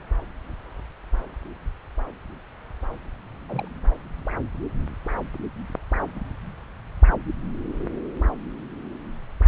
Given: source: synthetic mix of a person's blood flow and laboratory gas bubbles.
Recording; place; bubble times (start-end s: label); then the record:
Doppler ultrasound of blood flow; subclavian vein
3.49-3.68 s: bubbles
3.90-3.94 s: bubbles
From the record:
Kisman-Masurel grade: 211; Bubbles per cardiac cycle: several, 3 to 8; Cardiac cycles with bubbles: 1 to 10%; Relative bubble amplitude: barely perceptible (0.100 to 0.250); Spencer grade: 1 (occasional bubble signal discernible with the cardiac motion signal, with majority of cardiac periods free of bubbles); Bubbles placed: anywhere in the cardiac cycle